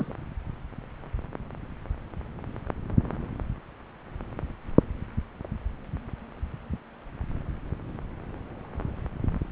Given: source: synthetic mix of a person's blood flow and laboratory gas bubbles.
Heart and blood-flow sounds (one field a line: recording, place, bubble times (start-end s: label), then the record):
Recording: Doppler ultrasound of blood flow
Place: subclavian vein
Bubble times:
0.00-0.14 s: bubbles
From the record:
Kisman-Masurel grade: 222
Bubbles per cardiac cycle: several, 3 to 8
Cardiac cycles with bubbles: 10 to 50%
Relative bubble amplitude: moderate (0.250 to 0.450)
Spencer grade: 2 (many but less than half of the cardiac periods contain bubble signals, singularly or in groups)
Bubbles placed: anywhere in the cardiac cycle